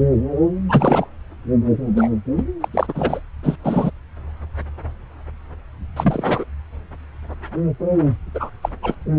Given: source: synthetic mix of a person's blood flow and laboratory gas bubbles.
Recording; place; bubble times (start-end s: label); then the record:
Doppler ultrasound of blood flow; subclavian vein
0.69-1.07 s: bubbles
1.96-2.10 s: bubbles
2.37-2.44 s: bubbles
2.60-2.68 s: bubbles
2.72-3.20 s: bubbles
3.42-3.56 s: bubbles
3.64-3.91 s: bubbles
5.96-6.44 s: bubbles
8.35-8.50 s: bubbles
8.63-8.69 s: bubbles
8.82-8.95 s: bubbles
From the record:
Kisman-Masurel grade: 232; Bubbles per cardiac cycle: several, 3 to 8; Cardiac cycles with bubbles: 50 to 99%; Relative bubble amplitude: moderate (0.250 to 0.450); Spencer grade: 3 (all of the cardiac periods contain showers or single bubble signals, but not dominating or overriding the cardiac motion signals); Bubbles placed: anywhere in the cardiac cycle